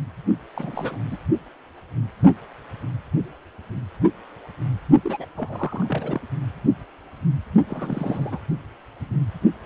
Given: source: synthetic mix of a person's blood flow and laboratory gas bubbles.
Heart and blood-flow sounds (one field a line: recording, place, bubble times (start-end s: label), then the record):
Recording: Doppler ultrasound of blood flow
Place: precordium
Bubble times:
0.55-0.97 s: bubbles
1.10-1.18 s: bubbles
5.04-5.25 s: bubbles
5.37-6.20 s: bubbles
7.68-8.39 s: bubbles
From the record:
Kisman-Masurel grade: 221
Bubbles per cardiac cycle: several, 3 to 8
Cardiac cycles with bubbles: 10 to 50%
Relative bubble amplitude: barely perceptible (0.100 to 0.250)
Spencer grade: 2 (many but less than half of the cardiac periods contain bubble signals, singularly or in groups)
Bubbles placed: only in the low amplitude regions of the cardiac cycle